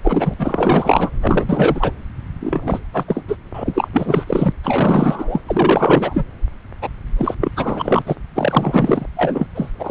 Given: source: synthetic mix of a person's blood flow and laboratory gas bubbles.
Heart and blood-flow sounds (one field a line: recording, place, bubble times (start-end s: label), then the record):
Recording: Doppler ultrasound of blood flow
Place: subclavian vein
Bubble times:
0.03-0.34 s: bubbles
0.39-1.10 s: bubbles
1.21-1.92 s: bubbles
2.41-2.80 s: bubbles
2.93-3.04 s: bubbles
3.08-3.23 s: bubbles
3.28-3.37 s: bubbles
3.54-3.89 s: bubbles
3.92-4.53 s: bubbles
4.63-5.42 s: bubbles
5.46-6.25 s: bubbles
6.82-6.88 s: bubbles
7.18-7.34 s: bubbles
7.41-7.52 s: bubbles
7.56-8.03 s: bubbles
8.06-8.16 s: bubbles
8.35-9.06 s: bubbles
9.16-9.47 s: bubbles
9.54-9.70 s: bubbles
9.79-9.91 s: bubbles
From the record:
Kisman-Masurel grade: 444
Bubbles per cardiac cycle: continuous sound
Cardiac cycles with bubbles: 100%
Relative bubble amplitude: maximal (0.775 to 0.999)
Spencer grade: 4 (maximum detectable bubble signal sounding continuously throughout systole and diastole of every cardiac period, and overriding the amplitude of the normal cardiac signals)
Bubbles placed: anywhere in the cardiac cycle